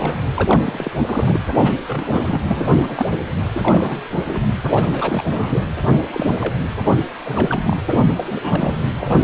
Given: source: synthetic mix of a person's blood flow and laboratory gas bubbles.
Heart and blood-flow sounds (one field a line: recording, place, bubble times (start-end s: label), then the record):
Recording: Doppler ultrasound of blood flow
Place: precordium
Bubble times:
0.00-0.17 s: bubbles
0.34-0.91 s: bubbles
1.05-1.41 s: bubbles
1.56-1.85 s: bubbles
1.88-2.40 s: bubbles
2.47-3.07 s: bubbles
3.53-4.03 s: bubbles
4.28-4.40 s: bubbles
4.67-5.64 s: bubbles
5.88-5.96 s: bubbles
6.01-6.54 s: bubbles
6.92-7.05 s: bubbles
7.24-7.79 s: bubbles
7.87-7.99 s: bubbles
8.16-8.24 s: bubbles
8.29-8.78 s: bubbles
8.96-9.24 s: bubbles
From the record:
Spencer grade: 3 (all of the cardiac periods contain showers or single bubble signals, but not dominating or overriding the cardiac motion signals)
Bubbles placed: anywhere in the cardiac cycle